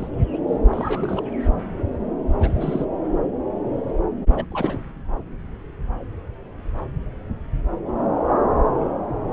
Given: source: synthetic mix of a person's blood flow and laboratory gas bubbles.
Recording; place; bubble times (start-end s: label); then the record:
Doppler ultrasound of blood flow; subclavian vein
0.00-0.08 s: bubbles
0.33-0.37 s: bubbles
0.71-1.22 s: bubbles
2.41-2.85 s: bubbles
4.32-4.45 s: bubbles
4.50-4.83 s: bubbles
From the record:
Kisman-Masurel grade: 222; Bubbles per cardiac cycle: several, 3 to 8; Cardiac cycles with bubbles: 10 to 50%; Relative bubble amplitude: moderate (0.250 to 0.450); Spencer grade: 2 (many but less than half of the cardiac periods contain bubble signals, singularly or in groups); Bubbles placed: anywhere in the cardiac cycle